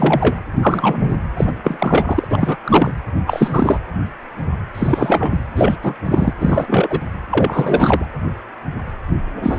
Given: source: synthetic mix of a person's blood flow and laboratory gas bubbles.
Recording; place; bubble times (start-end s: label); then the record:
Doppler ultrasound of blood flow; precordium
0.00-0.41 s: bubbles
0.62-1.16 s: bubbles
1.36-1.52 s: bubbles
1.64-2.27 s: bubbles
2.31-2.56 s: bubbles
2.64-2.93 s: bubbles
3.27-3.80 s: bubbles
4.74-5.42 s: bubbles
5.55-5.77 s: bubbles
5.82-5.94 s: bubbles
6.05-6.33 s: bubbles
6.40-7.00 s: bubbles
7.30-8.05 s: bubbles
9.43-9.59 s: bubbles
From the record:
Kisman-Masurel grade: 333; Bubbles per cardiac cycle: rolling drumbeat, 9 or more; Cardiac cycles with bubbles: 50 to 99%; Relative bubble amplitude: loud (0.450 to 0.775); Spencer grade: 3 (all of the cardiac periods contain showers or single bubble signals, but not dominating or overriding the cardiac motion signals); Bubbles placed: anywhere in the cardiac cycle